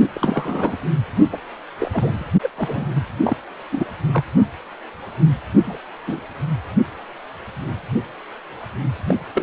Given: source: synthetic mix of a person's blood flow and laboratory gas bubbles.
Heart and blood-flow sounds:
Doppler ultrasound of blood flow; precordium
0.13-0.77 s: bubbles
1.31-1.39 s: bubbles
1.79-2.25 s: bubbles
2.42-2.50 s: bubbles
2.58-2.88 s: bubbles
3.25-3.37 s: bubbles
3.71-3.85 s: bubbles
4.12-4.24 s: bubbles
5.65-5.78 s: bubbles
6.07-6.20 s: bubbles
9.07-9.16 s: bubbles
9.34-9.43 s: bubbles
From the record:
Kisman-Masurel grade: 232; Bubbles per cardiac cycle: several, 3 to 8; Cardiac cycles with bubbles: 50 to 99%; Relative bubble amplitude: moderate (0.250 to 0.450); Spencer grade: 3 (all of the cardiac periods contain showers or single bubble signals, but not dominating or overriding the cardiac motion signals); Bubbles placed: only in the low amplitude regions of the cardiac cycle

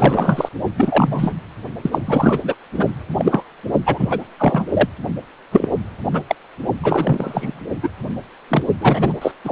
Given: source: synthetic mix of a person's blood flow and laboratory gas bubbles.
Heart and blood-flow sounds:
Doppler ultrasound of blood flow; precordium
0.00-0.49 s: bubbles
0.77-1.33 s: bubbles
1.82-1.99 s: bubbles
2.05-2.55 s: bubbles
2.78-2.88 s: bubbles
3.19-3.44 s: bubbles
3.85-4.23 s: bubbles
4.38-4.66 s: bubbles
4.73-4.88 s: bubbles
5.51-5.70 s: bubbles
6.11-6.23 s: bubbles
6.29-6.35 s: bubbles
6.82-7.61 s: bubbles
7.82-7.89 s: bubbles
8.48-8.63 s: bubbles
8.79-9.13 s: bubbles
9.21-9.31 s: bubbles
9.44-9.52 s: bubbles
From the record:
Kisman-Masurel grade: 243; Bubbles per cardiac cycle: several, 3 to 8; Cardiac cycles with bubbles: 100%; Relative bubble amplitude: loud (0.450 to 0.775); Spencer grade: 3 (all of the cardiac periods contain showers or single bubble signals, but not dominating or overriding the cardiac motion signals); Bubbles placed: only in the low amplitude regions of the cardiac cycle

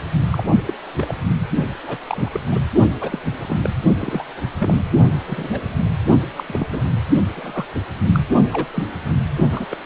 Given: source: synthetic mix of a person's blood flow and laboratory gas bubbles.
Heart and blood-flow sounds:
Doppler ultrasound of blood flow; precordium
0.30-0.44 s: bubbles
0.66-0.73 s: bubbles
0.96-1.15 s: bubbles
1.82-1.97 s: bubbles
2.08-2.29 s: bubbles
2.33-2.40 s: bubbles
2.52-2.59 s: bubbles
3.00-3.20 s: bubbles
3.41-3.57 s: bubbles
3.63-3.70 s: bubbles
3.99-4.24 s: bubbles
4.59-4.78 s: bubbles
5.26-5.59 s: bubbles
6.38-6.44 s: bubbles
6.46-6.67 s: bubbles
6.71-6.82 s: bubbles
7.32-7.66 s: bubbles
7.75-7.79 s: bubbles
8.12-8.20 s: bubbles
8.52-8.66 s: bubbles
8.74-8.85 s: bubbles
9.52-9.65 s: bubbles
9.71-9.76 s: bubbles
From the record:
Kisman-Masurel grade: 242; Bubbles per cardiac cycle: several, 3 to 8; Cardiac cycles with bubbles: 100%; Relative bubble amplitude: moderate (0.250 to 0.450); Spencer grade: 3 (all of the cardiac periods contain showers or single bubble signals, but not dominating or overriding the cardiac motion signals); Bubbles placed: only in the low amplitude regions of the cardiac cycle

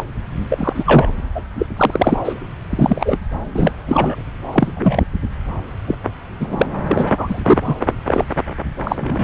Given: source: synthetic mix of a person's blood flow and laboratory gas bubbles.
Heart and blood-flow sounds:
Doppler ultrasound of blood flow; subclavian vein
0.00-0.04 s: bubbles
0.49-1.10 s: bubbles
1.34-1.43 s: bubbles
1.58-1.66 s: bubbles
1.77-2.17 s: bubbles
2.25-2.33 s: bubbles
2.70-3.17 s: bubbles
3.55-3.72 s: bubbles
3.86-4.22 s: bubbles
4.52-4.71 s: bubbles
4.75-5.03 s: bubbles
5.88-5.95 s: bubbles
6.40-6.71 s: bubbles
6.88-7.40 s: bubbles
7.46-7.58 s: bubbles
7.65-7.74 s: bubbles
8.07-8.24 s: bubbles
8.83-9.24 s: bubbles
From the record:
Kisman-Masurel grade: 243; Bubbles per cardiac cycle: several, 3 to 8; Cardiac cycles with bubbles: 100%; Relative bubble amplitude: loud (0.450 to 0.775); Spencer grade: 3 (all of the cardiac periods contain showers or single bubble signals, but not dominating or overriding the cardiac motion signals); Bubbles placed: anywhere in the cardiac cycle

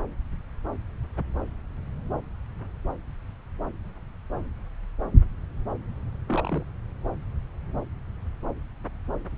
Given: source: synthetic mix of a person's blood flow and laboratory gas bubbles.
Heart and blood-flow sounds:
Doppler ultrasound of blood flow; subclavian vein
6.26-6.63 s: bubbles
From the record:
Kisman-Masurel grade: 112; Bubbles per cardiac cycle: 1 to 2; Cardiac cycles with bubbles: 1 to 10%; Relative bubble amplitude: moderate (0.250 to 0.450); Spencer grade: 1 (occasional bubble signal discernible with the cardiac motion signal, with majority of cardiac periods free of bubbles); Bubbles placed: anywhere in the cardiac cycle

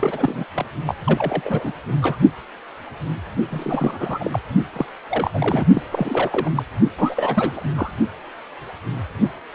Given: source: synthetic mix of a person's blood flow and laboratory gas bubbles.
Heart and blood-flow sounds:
Doppler ultrasound of blood flow; precordium
0.00-0.45 s: bubbles
0.54-0.66 s: bubbles
0.86-0.95 s: bubbles
1.06-1.72 s: bubbles
2.02-2.17 s: bubbles
3.50-4.39 s: bubbles
4.73-4.86 s: bubbles
5.09-5.31 s: bubbles
5.33-5.66 s: bubbles
5.74-5.82 s: bubbles
5.91-6.50 s: bubbles
6.55-6.63 s: bubbles
6.97-7.68 s: bubbles
7.74-7.92 s: bubbles
From the record:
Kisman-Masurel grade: 332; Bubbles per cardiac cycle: rolling drumbeat, 9 or more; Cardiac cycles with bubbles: 50 to 99%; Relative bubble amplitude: moderate (0.250 to 0.450); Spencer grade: 3 (all of the cardiac periods contain showers or single bubble signals, but not dominating or overriding the cardiac motion signals); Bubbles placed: only in the low amplitude regions of the cardiac cycle

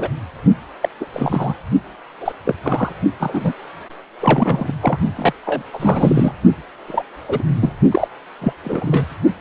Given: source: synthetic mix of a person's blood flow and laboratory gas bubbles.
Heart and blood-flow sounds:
Doppler ultrasound of blood flow; precordium
0.00-0.08 s: bubbles
0.81-0.89 s: bubbles
1.00-1.05 s: bubbles
1.14-1.54 s: bubbles
2.21-2.33 s: bubbles
2.45-2.55 s: bubbles
2.62-2.92 s: bubbles
3.19-3.53 s: bubbles
4.20-4.72 s: bubbles
4.81-4.97 s: bubbles
5.16-5.33 s: bubbles
5.45-5.62 s: bubbles
5.73-6.32 s: bubbles
6.87-7.03 s: bubbles
7.29-7.43 s: bubbles
7.60-7.72 s: bubbles
7.91-8.08 s: bubbles
8.41-8.53 s: bubbles
8.64-9.05 s: bubbles
From the record:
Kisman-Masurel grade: 243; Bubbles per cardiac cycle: several, 3 to 8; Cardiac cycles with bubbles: 100%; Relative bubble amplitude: loud (0.450 to 0.775); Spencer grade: 3 (all of the cardiac periods contain showers or single bubble signals, but not dominating or overriding the cardiac motion signals); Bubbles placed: only in the low amplitude regions of the cardiac cycle

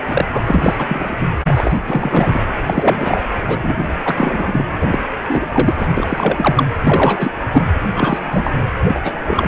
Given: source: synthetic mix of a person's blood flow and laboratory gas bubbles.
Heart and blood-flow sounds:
Doppler ultrasound of blood flow; precordium
0.08-0.28 s: bubbles
0.32-0.75 s: bubbles
0.78-1.26 s: bubbles
1.46-1.78 s: bubbles
1.86-2.38 s: bubbles
2.67-3.21 s: bubbles
3.47-3.58 s: bubbles
3.62-3.83 s: bubbles
4.05-4.64 s: bubbles
4.81-4.99 s: bubbles
5.29-5.74 s: bubbles
5.79-5.86 s: bubbles
5.97-6.64 s: bubbles
6.83-7.31 s: bubbles
7.52-7.62 s: bubbles
7.96-8.19 s: bubbles
8.31-8.52 s: bubbles
8.57-8.64 s: bubbles
8.83-9.14 s: bubbles
9.28-9.48 s: bubbles
From the record:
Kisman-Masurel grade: 343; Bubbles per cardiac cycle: rolling drumbeat, 9 or more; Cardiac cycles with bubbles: 100%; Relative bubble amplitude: loud (0.450 to 0.775); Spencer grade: 3 (all of the cardiac periods contain showers or single bubble signals, but not dominating or overriding the cardiac motion signals); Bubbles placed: anywhere in the cardiac cycle

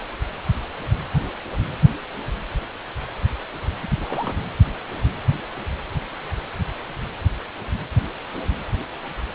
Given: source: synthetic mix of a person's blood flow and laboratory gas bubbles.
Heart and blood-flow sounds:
Doppler ultrasound of blood flow; precordium
3.82-3.88 s: bubbles
4.00-4.39 s: bubbles
From the record:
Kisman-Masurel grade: 211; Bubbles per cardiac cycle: several, 3 to 8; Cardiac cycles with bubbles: 1 to 10%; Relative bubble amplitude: barely perceptible (0.100 to 0.250); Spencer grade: 1 (occasional bubble signal discernible with the cardiac motion signal, with majority of cardiac periods free of bubbles); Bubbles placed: anywhere in the cardiac cycle

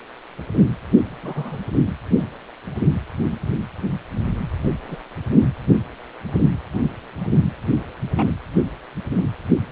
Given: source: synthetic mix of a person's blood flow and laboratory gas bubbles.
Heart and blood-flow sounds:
Doppler ultrasound of blood flow; precordium
1.23-1.59 s: bubbles
4.89-4.99 s: bubbles
8.16-8.31 s: bubbles
From the record:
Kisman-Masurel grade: 121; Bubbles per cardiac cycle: 1 to 2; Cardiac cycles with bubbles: 10 to 50%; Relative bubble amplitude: barely perceptible (0.100 to 0.250); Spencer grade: 2 (many but less than half of the cardiac periods contain bubble signals, singularly or in groups); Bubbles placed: anywhere in the cardiac cycle

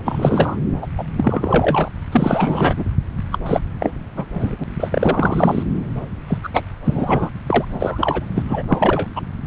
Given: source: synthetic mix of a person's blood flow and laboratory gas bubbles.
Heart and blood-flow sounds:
Doppler ultrasound of blood flow; subclavian vein
0.05-0.57 s: bubbles
0.81-0.86 s: bubbles
0.97-1.04 s: bubbles
1.17-1.89 s: bubbles
2.11-2.84 s: bubbles
3.31-3.39 s: bubbles
3.46-3.60 s: bubbles
3.79-3.92 s: bubbles
4.16-4.26 s: bubbles
4.40-4.64 s: bubbles
4.67-5.63 s: bubbles
6.28-6.39 s: bubbles
6.43-6.49 s: bubbles
6.53-6.62 s: bubbles
6.85-7.29 s: bubbles
7.46-7.65 s: bubbles
7.70-8.25 s: bubbles
8.35-8.43 s: bubbles
8.48-8.63 s: bubbles
8.68-9.08 s: bubbles
9.16-9.21 s: bubbles
From the record:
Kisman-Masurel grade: 343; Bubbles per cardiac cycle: rolling drumbeat, 9 or more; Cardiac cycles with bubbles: 100%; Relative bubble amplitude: loud (0.450 to 0.775); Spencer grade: 3 (all of the cardiac periods contain showers or single bubble signals, but not dominating or overriding the cardiac motion signals); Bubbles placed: anywhere in the cardiac cycle

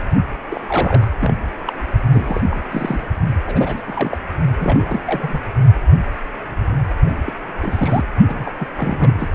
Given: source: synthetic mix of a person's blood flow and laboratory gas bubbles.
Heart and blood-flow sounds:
Doppler ultrasound of blood flow; precordium
0.51-0.61 s: bubbles
0.68-1.11 s: bubbles
1.20-1.33 s: bubbles
1.65-1.73 s: bubbles
2.12-2.42 s: bubbles
2.51-2.60 s: bubbles
2.71-3.05 s: bubbles
3.46-3.82 s: bubbles
3.86-4.17 s: bubbles
4.58-5.01 s: bubbles
5.06-5.40 s: bubbles
7.06-7.17 s: bubbles
7.26-7.33 s: bubbles
7.57-8.04 s: bubbles
8.27-8.52 s: bubbles
8.59-8.67 s: bubbles
8.76-9.29 s: bubbles
From the record:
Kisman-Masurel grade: 332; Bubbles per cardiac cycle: rolling drumbeat, 9 or more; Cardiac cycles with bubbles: 50 to 99%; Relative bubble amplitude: moderate (0.250 to 0.450); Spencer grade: 3 (all of the cardiac periods contain showers or single bubble signals, but not dominating or overriding the cardiac motion signals); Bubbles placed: only in the low amplitude regions of the cardiac cycle

